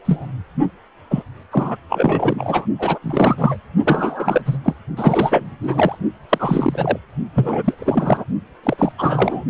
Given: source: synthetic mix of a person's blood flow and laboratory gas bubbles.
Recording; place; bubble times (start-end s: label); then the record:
Doppler ultrasound of blood flow; precordium
0.05-0.27 s: bubbles
1.10-1.23 s: bubbles
1.50-1.76 s: bubbles
1.89-2.66 s: bubbles
2.79-2.99 s: bubbles
3.02-3.57 s: bubbles
3.85-4.42 s: bubbles
4.45-4.58 s: bubbles
4.63-4.75 s: bubbles
4.97-5.52 s: bubbles
5.60-5.98 s: bubbles
6.29-6.98 s: bubbles
7.34-7.74 s: bubbles
7.76-8.25 s: bubbles
8.63-8.93 s: bubbles
8.98-9.45 s: bubbles
From the record:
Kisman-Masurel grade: 343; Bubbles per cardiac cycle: rolling drumbeat, 9 or more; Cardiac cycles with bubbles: 100%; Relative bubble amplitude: loud (0.450 to 0.775); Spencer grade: 3 (all of the cardiac periods contain showers or single bubble signals, but not dominating or overriding the cardiac motion signals); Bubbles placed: only in the low amplitude regions of the cardiac cycle